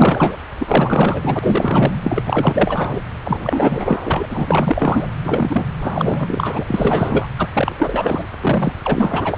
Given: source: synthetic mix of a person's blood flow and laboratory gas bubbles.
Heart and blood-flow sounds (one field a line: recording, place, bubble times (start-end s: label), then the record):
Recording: Doppler ultrasound of blood flow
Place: subclavian vein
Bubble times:
0.00-0.37 s: bubbles
0.59-1.96 s: bubbles
2.03-2.23 s: bubbles
2.25-3.01 s: bubbles
3.23-3.98 s: bubbles
4.04-4.25 s: bubbles
4.29-5.08 s: bubbles
5.25-5.65 s: bubbles
5.83-6.64 s: bubbles
6.67-7.27 s: bubbles
7.38-7.49 s: bubbles
7.53-8.25 s: bubbles
8.40-8.73 s: bubbles
8.84-9.38 s: bubbles
From the record:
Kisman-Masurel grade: 444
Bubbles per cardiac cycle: continuous sound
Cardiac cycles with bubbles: 100%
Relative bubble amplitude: maximal (0.775 to 0.999)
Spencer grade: 4 (maximum detectable bubble signal sounding continuously throughout systole and diastole of every cardiac period, and overriding the amplitude of the normal cardiac signals)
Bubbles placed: anywhere in the cardiac cycle